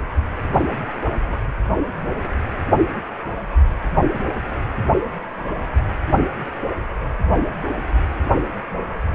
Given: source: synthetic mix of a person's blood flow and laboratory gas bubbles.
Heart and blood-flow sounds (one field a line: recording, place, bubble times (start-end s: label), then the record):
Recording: Doppler ultrasound of blood flow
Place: precordium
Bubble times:
0.51-0.64 s: bubbles
1.27-1.36 s: bubbles
6.21-6.27 s: bubbles
From the record:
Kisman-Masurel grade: 122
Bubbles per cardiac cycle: 1 to 2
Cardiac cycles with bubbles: 10 to 50%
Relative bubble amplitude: moderate (0.250 to 0.450)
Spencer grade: 2 (many but less than half of the cardiac periods contain bubble signals, singularly or in groups)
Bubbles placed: anywhere in the cardiac cycle